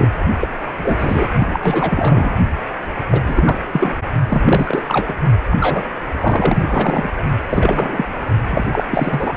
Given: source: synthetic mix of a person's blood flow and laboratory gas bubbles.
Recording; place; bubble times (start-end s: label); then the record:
Doppler ultrasound of blood flow; precordium
0.00-0.09 s: bubbles
0.40-0.47 s: bubbles
0.79-1.29 s: bubbles
1.39-2.42 s: bubbles
3.11-3.22 s: bubbles
3.26-3.58 s: bubbles
3.72-3.94 s: bubbles
4.29-4.83 s: bubbles
4.88-5.15 s: bubbles
5.46-5.57 s: bubbles
5.60-5.83 s: bubbles
6.21-7.09 s: bubbles
7.17-7.24 s: bubbles
7.50-8.05 s: bubbles
8.49-8.67 s: bubbles
8.72-8.85 s: bubbles
8.90-9.33 s: bubbles
From the record:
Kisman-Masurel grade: 332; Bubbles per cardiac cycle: rolling drumbeat, 9 or more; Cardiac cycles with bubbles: 50 to 99%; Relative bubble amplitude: moderate (0.250 to 0.450); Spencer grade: 3 (all of the cardiac periods contain showers or single bubble signals, but not dominating or overriding the cardiac motion signals); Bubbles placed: anywhere in the cardiac cycle